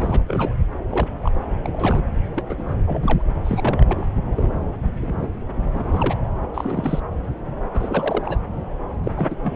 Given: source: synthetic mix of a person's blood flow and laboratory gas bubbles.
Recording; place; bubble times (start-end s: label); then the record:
Doppler ultrasound of blood flow; subclavian vein
0.00-0.22 s: bubbles
0.27-0.56 s: bubbles
0.89-1.08 s: bubbles
1.22-1.31 s: bubbles
1.64-2.03 s: bubbles
2.36-2.45 s: bubbles
2.49-2.74 s: bubbles
2.86-3.22 s: bubbles
3.44-4.05 s: bubbles
4.29-4.50 s: bubbles
5.01-5.28 s: bubbles
5.75-6.15 s: bubbles
6.54-7.00 s: bubbles
7.73-8.37 s: bubbles
9.04-9.12 s: bubbles
9.17-9.28 s: bubbles
9.30-9.36 s: bubbles
9.43-9.56 s: bubbles
From the record:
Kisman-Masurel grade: 232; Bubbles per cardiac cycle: several, 3 to 8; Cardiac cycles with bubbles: 50 to 99%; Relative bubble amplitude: moderate (0.250 to 0.450); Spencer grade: 3 (all of the cardiac periods contain showers or single bubble signals, but not dominating or overriding the cardiac motion signals); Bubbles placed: anywhere in the cardiac cycle